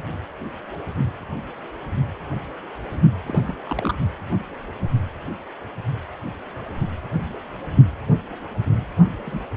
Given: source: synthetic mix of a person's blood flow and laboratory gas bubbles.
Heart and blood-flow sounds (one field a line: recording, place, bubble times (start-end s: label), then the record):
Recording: Doppler ultrasound of blood flow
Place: precordium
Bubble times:
3.26-3.54 s: bubbles
3.63-3.95 s: bubbles
9.25-9.42 s: bubbles
From the record:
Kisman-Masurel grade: 121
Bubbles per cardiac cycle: 1 to 2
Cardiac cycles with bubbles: 10 to 50%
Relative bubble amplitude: barely perceptible (0.100 to 0.250)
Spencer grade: 2 (many but less than half of the cardiac periods contain bubble signals, singularly or in groups)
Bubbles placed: only in the low amplitude regions of the cardiac cycle